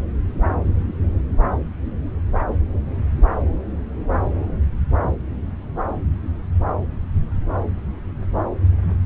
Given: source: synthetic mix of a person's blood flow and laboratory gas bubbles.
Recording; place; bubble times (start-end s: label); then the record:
Doppler ultrasound of blood flow; subclavian vein
no bubbles
From the record:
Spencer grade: 0 (complete lack of bubble signals)